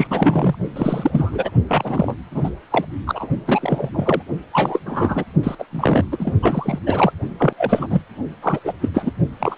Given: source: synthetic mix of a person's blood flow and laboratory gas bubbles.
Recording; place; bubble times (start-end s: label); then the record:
Doppler ultrasound of blood flow; precordium
0.00-0.08 s: bubbles
0.10-0.55 s: bubbles
0.75-1.50 s: bubbles
1.69-2.15 s: bubbles
2.31-2.50 s: bubbles
2.70-2.85 s: bubbles
3.06-3.28 s: bubbles
3.46-3.90 s: bubbles
3.94-4.23 s: bubbles
4.52-4.80 s: bubbles
4.86-5.25 s: bubbles
5.43-5.55 s: bubbles
5.58-5.65 s: bubbles
5.71-6.05 s: bubbles
6.11-6.33 s: bubbles
6.42-6.79 s: bubbles
6.86-7.12 s: bubbles
7.39-7.53 s: bubbles
7.58-7.87 s: bubbles
7.90-8.01 s: bubbles
8.42-8.59 s: bubbles
8.64-8.72 s: bubbles
8.81-8.89 s: bubbles
8.93-9.12 s: bubbles
9.39-9.55 s: bubbles
From the record:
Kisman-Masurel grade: 343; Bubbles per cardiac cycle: rolling drumbeat, 9 or more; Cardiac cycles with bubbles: 100%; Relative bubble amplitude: loud (0.450 to 0.775); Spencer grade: 3 (all of the cardiac periods contain showers or single bubble signals, but not dominating or overriding the cardiac motion signals); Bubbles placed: only in the low amplitude regions of the cardiac cycle